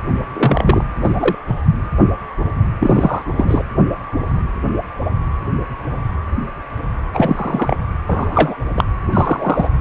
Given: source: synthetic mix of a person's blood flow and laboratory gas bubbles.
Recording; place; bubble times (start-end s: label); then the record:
Doppler ultrasound of blood flow; precordium
0.34-0.84 s: bubbles
1.03-1.09 s: bubbles
1.16-1.35 s: bubbles
1.47-1.62 s: bubbles
2.79-3.22 s: bubbles
3.37-3.63 s: bubbles
7.14-7.77 s: bubbles
8.07-8.56 s: bubbles
8.77-8.85 s: bubbles
9.12-9.67 s: bubbles
From the record:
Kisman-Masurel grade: 223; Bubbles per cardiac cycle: several, 3 to 8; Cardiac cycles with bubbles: 10 to 50%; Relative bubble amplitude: loud (0.450 to 0.775); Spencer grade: 2 (many but less than half of the cardiac periods contain bubble signals, singularly or in groups); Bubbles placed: anywhere in the cardiac cycle